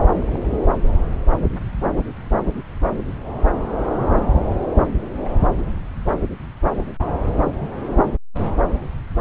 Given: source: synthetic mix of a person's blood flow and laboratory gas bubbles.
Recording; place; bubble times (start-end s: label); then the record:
Doppler ultrasound of blood flow; subclavian vein
0.05-0.39 s: bubbles
5.25-5.29 s: bubbles
From the record:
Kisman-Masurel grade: 121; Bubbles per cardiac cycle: 1 to 2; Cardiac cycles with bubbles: 10 to 50%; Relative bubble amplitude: barely perceptible (0.100 to 0.250); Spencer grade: 2 (many but less than half of the cardiac periods contain bubble signals, singularly or in groups); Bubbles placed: anywhere in the cardiac cycle